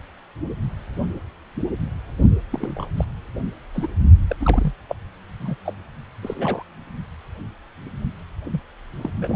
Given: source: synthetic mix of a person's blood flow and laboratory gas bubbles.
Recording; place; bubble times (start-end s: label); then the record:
Doppler ultrasound of blood flow; precordium
2.52-2.85 s: bubbles
2.96-3.04 s: bubbles
3.75-3.87 s: bubbles
4.29-4.36 s: bubbles
4.40-4.74 s: bubbles
4.89-4.96 s: bubbles
5.40-5.56 s: bubbles
5.66-5.74 s: bubbles
6.22-6.63 s: bubbles
8.44-8.60 s: bubbles
9.01-9.10 s: bubbles
9.21-9.36 s: bubbles
From the record:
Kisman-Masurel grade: 221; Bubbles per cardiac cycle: several, 3 to 8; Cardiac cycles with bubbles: 10 to 50%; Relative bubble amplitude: barely perceptible (0.100 to 0.250); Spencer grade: 2 (many but less than half of the cardiac periods contain bubble signals, singularly or in groups); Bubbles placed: only in the low amplitude regions of the cardiac cycle